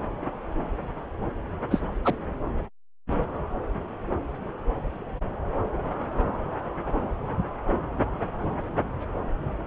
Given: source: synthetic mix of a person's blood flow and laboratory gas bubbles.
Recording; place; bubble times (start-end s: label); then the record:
Doppler ultrasound of blood flow; subclavian vein
1.70-1.81 s: bubbles
2.04-2.15 s: bubbles
From the record:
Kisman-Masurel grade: 123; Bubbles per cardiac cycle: 1 to 2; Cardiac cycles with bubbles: 10 to 50%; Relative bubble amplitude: loud (0.450 to 0.775); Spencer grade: 2 (many but less than half of the cardiac periods contain bubble signals, singularly or in groups); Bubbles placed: anywhere in the cardiac cycle